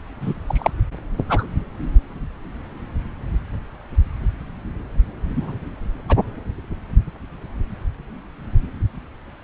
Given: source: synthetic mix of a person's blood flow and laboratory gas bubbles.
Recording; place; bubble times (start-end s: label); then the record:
Doppler ultrasound of blood flow; subclavian vein
0.21-0.33 s: bubbles
0.46-0.71 s: bubbles
1.28-1.48 s: bubbles
5.36-5.58 s: bubbles
6.09-6.16 s: bubbles
From the record:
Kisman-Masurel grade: 123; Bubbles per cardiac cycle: 1 to 2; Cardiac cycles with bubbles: 10 to 50%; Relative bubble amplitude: loud (0.450 to 0.775); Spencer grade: 2 (many but less than half of the cardiac periods contain bubble signals, singularly or in groups); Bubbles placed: anywhere in the cardiac cycle